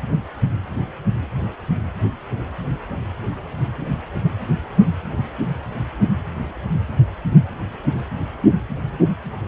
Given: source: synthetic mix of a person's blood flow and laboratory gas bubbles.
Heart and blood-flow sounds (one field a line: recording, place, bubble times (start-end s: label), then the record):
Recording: Doppler ultrasound of blood flow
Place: precordium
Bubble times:
no bubbles
From the record:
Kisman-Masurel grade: 000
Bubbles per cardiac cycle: 0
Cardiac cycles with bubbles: 0%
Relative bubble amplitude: no bubbles discernible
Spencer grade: 0 (complete lack of bubble signals)